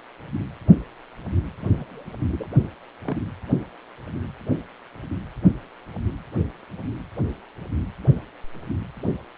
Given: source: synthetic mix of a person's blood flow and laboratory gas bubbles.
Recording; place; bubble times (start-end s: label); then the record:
Doppler ultrasound of blood flow; precordium
1.58-2.04 s: bubbles
2.29-2.47 s: bubbles
3.04-3.17 s: bubbles
From the record:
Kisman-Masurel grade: 121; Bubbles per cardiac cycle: 1 to 2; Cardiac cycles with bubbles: 10 to 50%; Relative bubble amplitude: barely perceptible (0.100 to 0.250); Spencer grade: 2 (many but less than half of the cardiac periods contain bubble signals, singularly or in groups); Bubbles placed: anywhere in the cardiac cycle